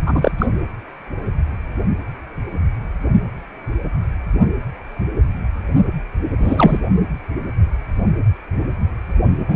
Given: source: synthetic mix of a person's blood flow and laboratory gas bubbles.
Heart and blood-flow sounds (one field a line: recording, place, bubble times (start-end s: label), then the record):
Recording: Doppler ultrasound of blood flow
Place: precordium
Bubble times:
0.06-0.32 s: bubbles
0.38-0.46 s: bubbles
6.38-6.88 s: bubbles
9.48-9.56 s: bubbles
From the record:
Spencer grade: 2 (many but less than half of the cardiac periods contain bubble signals, singularly or in groups)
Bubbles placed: anywhere in the cardiac cycle